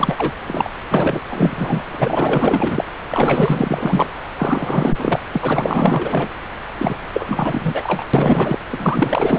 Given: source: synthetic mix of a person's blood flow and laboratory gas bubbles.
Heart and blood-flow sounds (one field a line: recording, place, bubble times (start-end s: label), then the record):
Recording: Doppler ultrasound of blood flow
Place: subclavian vein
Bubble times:
0.00-0.32 s: bubbles
0.48-0.70 s: bubbles
0.87-1.20 s: bubbles
1.29-1.83 s: bubbles
1.91-2.84 s: bubbles
3.08-4.07 s: bubbles
4.38-5.19 s: bubbles
5.33-5.39 s: bubbles
5.42-6.29 s: bubbles
6.79-6.96 s: bubbles
7.12-8.05 s: bubbles
8.13-8.58 s: bubbles
8.69-9.39 s: bubbles
From the record:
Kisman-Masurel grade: 444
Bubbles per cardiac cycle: continuous sound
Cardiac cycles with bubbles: 100%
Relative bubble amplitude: maximal (0.775 to 0.999)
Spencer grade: 4 (maximum detectable bubble signal sounding continuously throughout systole and diastole of every cardiac period, and overriding the amplitude of the normal cardiac signals)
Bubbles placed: anywhere in the cardiac cycle